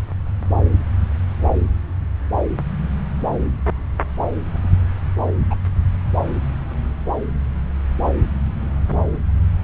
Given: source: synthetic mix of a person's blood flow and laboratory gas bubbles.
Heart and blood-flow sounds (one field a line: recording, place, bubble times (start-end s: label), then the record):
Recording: Doppler ultrasound of blood flow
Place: subclavian vein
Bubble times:
5.50-5.56 s: bubbles
From the record:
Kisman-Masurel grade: 112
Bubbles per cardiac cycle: 1 to 2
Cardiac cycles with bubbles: 1 to 10%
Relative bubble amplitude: moderate (0.250 to 0.450)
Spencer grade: 1 (occasional bubble signal discernible with the cardiac motion signal, with majority of cardiac periods free of bubbles)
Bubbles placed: anywhere in the cardiac cycle